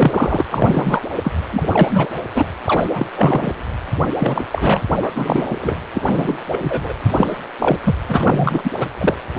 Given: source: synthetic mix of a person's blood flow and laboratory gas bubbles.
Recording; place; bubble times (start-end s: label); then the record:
Doppler ultrasound of blood flow; precordium
0.00-0.45 s: bubbles
0.51-1.00 s: bubbles
1.23-1.31 s: bubbles
1.50-2.10 s: bubbles
2.34-2.46 s: bubbles
2.65-2.89 s: bubbles
2.93-3.07 s: bubbles
3.14-3.53 s: bubbles
4.18-4.45 s: bubbles
4.51-4.82 s: bubbles
5.02-5.12 s: bubbles
5.15-5.77 s: bubbles
5.94-6.02 s: bubbles
6.06-6.38 s: bubbles
6.48-6.93 s: bubbles
7.10-7.38 s: bubbles
7.60-7.78 s: bubbles
7.84-7.95 s: bubbles
8.08-8.71 s: bubbles
8.80-8.88 s: bubbles
9.00-9.15 s: bubbles
9.36-9.39 s: bubbles
From the record:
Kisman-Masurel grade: 343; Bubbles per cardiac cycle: rolling drumbeat, 9 or more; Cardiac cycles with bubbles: 100%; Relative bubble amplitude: loud (0.450 to 0.775); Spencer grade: 3 (all of the cardiac periods contain showers or single bubble signals, but not dominating or overriding the cardiac motion signals); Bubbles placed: anywhere in the cardiac cycle